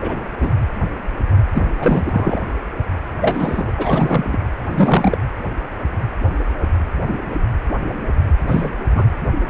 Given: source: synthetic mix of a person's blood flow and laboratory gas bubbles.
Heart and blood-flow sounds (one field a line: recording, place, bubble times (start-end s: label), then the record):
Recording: Doppler ultrasound of blood flow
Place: precordium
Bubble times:
0.01-0.20 s: bubbles
0.40-0.51 s: bubbles
1.54-1.68 s: bubbles
1.79-2.40 s: bubbles
3.20-3.71 s: bubbles
3.77-4.39 s: bubbles
4.66-5.18 s: bubbles
8.47-8.71 s: bubbles
8.95-9.04 s: bubbles
From the record:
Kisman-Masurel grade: 233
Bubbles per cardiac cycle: several, 3 to 8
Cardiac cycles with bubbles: 50 to 99%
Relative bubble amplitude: loud (0.450 to 0.775)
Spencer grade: 3 (all of the cardiac periods contain showers or single bubble signals, but not dominating or overriding the cardiac motion signals)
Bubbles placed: anywhere in the cardiac cycle